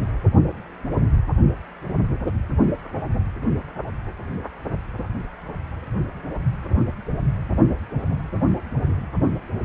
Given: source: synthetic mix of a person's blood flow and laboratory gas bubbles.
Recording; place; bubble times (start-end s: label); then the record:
Doppler ultrasound of blood flow; precordium
no bubbles
From the record:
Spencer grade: 0 (complete lack of bubble signals)